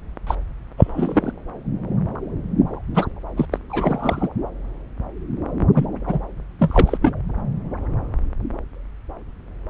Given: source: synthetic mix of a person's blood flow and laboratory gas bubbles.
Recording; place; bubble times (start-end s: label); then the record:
Doppler ultrasound of blood flow; subclavian vein
0.26-0.35 s: bubbles
0.77-1.32 s: bubbles
2.94-3.08 s: bubbles
3.36-3.46 s: bubbles
3.51-3.58 s: bubbles
3.69-4.28 s: bubbles
5.74-5.85 s: bubbles
6.06-6.19 s: bubbles
6.60-6.98 s: bubbles
7.02-7.12 s: bubbles
From the record:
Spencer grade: 3 (all of the cardiac periods contain showers or single bubble signals, but not dominating or overriding the cardiac motion signals); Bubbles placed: anywhere in the cardiac cycle